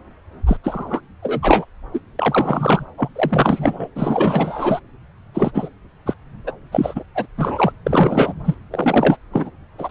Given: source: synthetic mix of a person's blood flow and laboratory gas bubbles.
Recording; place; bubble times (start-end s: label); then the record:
Doppler ultrasound of blood flow; subclavian vein
0.46-0.57 s: bubbles
0.64-1.00 s: bubbles
1.22-1.65 s: bubbles
1.94-2.00 s: bubbles
2.19-2.85 s: bubbles
2.97-3.09 s: bubbles
3.15-3.88 s: bubbles
3.95-4.80 s: bubbles
5.34-5.51 s: bubbles
5.54-5.68 s: bubbles
6.06-6.14 s: bubbles
6.46-6.51 s: bubbles
6.71-7.04 s: bubbles
7.14-7.26 s: bubbles
7.37-7.72 s: bubbles
7.86-8.34 s: bubbles
8.45-8.55 s: bubbles
8.72-9.17 s: bubbles
9.33-9.50 s: bubbles
9.78-9.91 s: bubbles
From the record:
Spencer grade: 3 (all of the cardiac periods contain showers or single bubble signals, but not dominating or overriding the cardiac motion signals); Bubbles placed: anywhere in the cardiac cycle